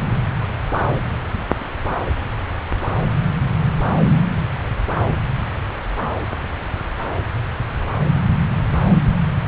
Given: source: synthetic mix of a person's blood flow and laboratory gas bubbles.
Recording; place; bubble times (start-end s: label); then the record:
Doppler ultrasound of blood flow; subclavian vein
1.31-1.39 s: bubbles
From the record:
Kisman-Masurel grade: 111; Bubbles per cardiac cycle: 1 to 2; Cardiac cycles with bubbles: 1 to 10%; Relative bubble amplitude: barely perceptible (0.100 to 0.250); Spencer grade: 1 (occasional bubble signal discernible with the cardiac motion signal, with majority of cardiac periods free of bubbles); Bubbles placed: anywhere in the cardiac cycle